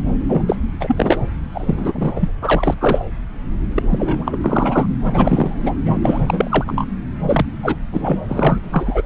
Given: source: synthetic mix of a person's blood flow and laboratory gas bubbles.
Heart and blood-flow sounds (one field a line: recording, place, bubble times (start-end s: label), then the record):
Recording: Doppler ultrasound of blood flow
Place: subclavian vein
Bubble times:
0.28-0.42 s: bubbles
0.48-0.56 s: bubbles
0.80-1.20 s: bubbles
1.54-2.29 s: bubbles
2.42-2.75 s: bubbles
2.80-3.05 s: bubbles
3.75-3.83 s: bubbles
3.89-4.38 s: bubbles
4.41-4.86 s: bubbles
5.03-5.75 s: bubbles
5.85-5.97 s: bubbles
6.03-6.85 s: bubbles
7.23-7.46 s: bubbles
7.63-7.77 s: bubbles
7.92-8.17 s: bubbles
8.28-8.59 s: bubbles
8.63-9.01 s: bubbles
From the record:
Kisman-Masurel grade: 343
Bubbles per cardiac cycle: rolling drumbeat, 9 or more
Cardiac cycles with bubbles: 100%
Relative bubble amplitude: loud (0.450 to 0.775)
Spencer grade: 3 (all of the cardiac periods contain showers or single bubble signals, but not dominating or overriding the cardiac motion signals)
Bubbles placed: anywhere in the cardiac cycle